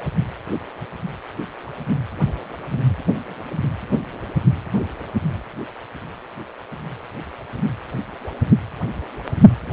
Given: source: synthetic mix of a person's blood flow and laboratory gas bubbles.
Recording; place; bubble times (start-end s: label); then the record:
Doppler ultrasound of blood flow; precordium
9.65-9.73 s: bubbles
From the record:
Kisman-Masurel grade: 211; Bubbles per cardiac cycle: several, 3 to 8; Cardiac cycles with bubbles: 1 to 10%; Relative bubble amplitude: barely perceptible (0.100 to 0.250); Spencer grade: 1 (occasional bubble signal discernible with the cardiac motion signal, with majority of cardiac periods free of bubbles); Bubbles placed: anywhere in the cardiac cycle